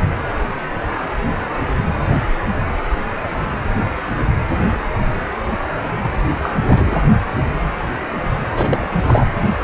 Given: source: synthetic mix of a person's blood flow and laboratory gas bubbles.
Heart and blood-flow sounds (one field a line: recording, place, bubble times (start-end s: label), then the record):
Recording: Doppler ultrasound of blood flow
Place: precordium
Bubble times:
6.03-6.09 s: bubbles
6.41-6.50 s: bubbles
6.64-7.02 s: bubbles
8.55-8.87 s: bubbles
9.05-9.26 s: bubbles
From the record:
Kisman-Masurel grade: 222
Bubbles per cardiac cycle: several, 3 to 8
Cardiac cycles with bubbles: 10 to 50%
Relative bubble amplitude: moderate (0.250 to 0.450)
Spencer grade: 2 (many but less than half of the cardiac periods contain bubble signals, singularly or in groups)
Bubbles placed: anywhere in the cardiac cycle